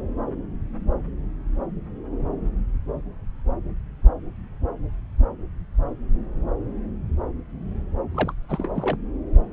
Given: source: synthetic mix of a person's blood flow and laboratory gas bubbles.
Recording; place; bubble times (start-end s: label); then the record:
Doppler ultrasound of blood flow; subclavian vein
8.14-8.33 s: bubbles
8.49-8.97 s: bubbles
From the record:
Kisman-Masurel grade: 211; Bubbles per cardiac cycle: several, 3 to 8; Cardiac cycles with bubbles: 1 to 10%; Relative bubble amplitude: barely perceptible (0.100 to 0.250); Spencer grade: 1 (occasional bubble signal discernible with the cardiac motion signal, with majority of cardiac periods free of bubbles); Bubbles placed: anywhere in the cardiac cycle